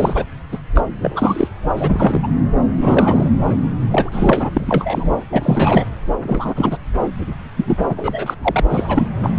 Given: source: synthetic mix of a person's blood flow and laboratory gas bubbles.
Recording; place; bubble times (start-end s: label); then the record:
Doppler ultrasound of blood flow; subclavian vein
0.00-0.24 s: bubbles
0.51-0.58 s: bubbles
0.75-0.81 s: bubbles
1.01-1.48 s: bubbles
1.76-2.27 s: bubbles
2.81-3.29 s: bubbles
3.46-3.58 s: bubbles
3.91-4.50 s: bubbles
4.54-5.12 s: bubbles
5.32-5.87 s: bubbles
6.23-6.78 s: bubbles
7.57-7.77 s: bubbles
7.88-8.35 s: bubbles
8.42-8.64 s: bubbles
8.69-9.08 s: bubbles
9.22-9.30 s: bubbles
From the record:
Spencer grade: 3 (all of the cardiac periods contain showers or single bubble signals, but not dominating or overriding the cardiac motion signals); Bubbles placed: anywhere in the cardiac cycle